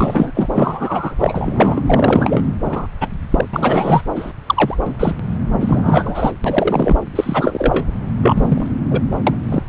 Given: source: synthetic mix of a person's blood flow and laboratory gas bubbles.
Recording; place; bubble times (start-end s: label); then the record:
Doppler ultrasound of blood flow; subclavian vein
0.00-0.31 s: bubbles
0.34-0.48 s: bubbles
0.54-1.16 s: bubbles
1.19-1.81 s: bubbles
1.86-2.42 s: bubbles
2.65-2.87 s: bubbles
3.00-3.08 s: bubbles
3.30-3.45 s: bubbles
3.53-4.02 s: bubbles
4.16-4.33 s: bubbles
4.46-4.75 s: bubbles
4.87-4.93 s: bubbles
5.00-5.13 s: bubbles
5.60-6.31 s: bubbles
6.44-6.96 s: bubbles
7.15-7.86 s: bubbles
8.22-8.66 s: bubbles
8.91-9.00 s: bubbles
9.27-9.37 s: bubbles
9.49-9.63 s: bubbles
From the record:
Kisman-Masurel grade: 243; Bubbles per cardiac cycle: several, 3 to 8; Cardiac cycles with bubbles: 100%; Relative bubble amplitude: loud (0.450 to 0.775); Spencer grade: 3 (all of the cardiac periods contain showers or single bubble signals, but not dominating or overriding the cardiac motion signals); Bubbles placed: anywhere in the cardiac cycle